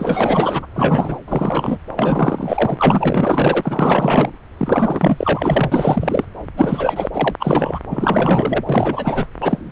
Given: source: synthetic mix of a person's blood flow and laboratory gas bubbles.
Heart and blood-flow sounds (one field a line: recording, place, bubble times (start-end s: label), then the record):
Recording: Doppler ultrasound of blood flow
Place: subclavian vein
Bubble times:
0.00-0.67 s: bubbles
0.75-1.17 s: bubbles
1.26-1.77 s: bubbles
1.96-4.32 s: bubbles
4.58-6.25 s: bubbles
6.57-7.10 s: bubbles
7.12-7.35 s: bubbles
7.40-7.79 s: bubbles
7.90-8.63 s: bubbles
8.66-9.26 s: bubbles
9.41-9.72 s: bubbles
From the record:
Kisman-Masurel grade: 444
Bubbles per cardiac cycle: continuous sound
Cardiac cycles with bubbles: 100%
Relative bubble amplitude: maximal (0.775 to 0.999)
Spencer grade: 4 (maximum detectable bubble signal sounding continuously throughout systole and diastole of every cardiac period, and overriding the amplitude of the normal cardiac signals)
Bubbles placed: anywhere in the cardiac cycle